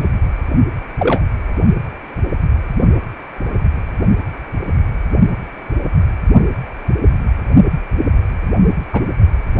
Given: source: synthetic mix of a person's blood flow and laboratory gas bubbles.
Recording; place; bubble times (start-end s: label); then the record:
Doppler ultrasound of blood flow; precordium
0.00-0.04 s: bubbles
0.99-1.22 s: bubbles
8.92-9.02 s: bubbles
From the record:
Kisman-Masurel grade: 123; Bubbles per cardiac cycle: 1 to 2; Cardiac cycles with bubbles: 10 to 50%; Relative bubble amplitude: loud (0.450 to 0.775); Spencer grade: 2 (many but less than half of the cardiac periods contain bubble signals, singularly or in groups); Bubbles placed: only in the low amplitude regions of the cardiac cycle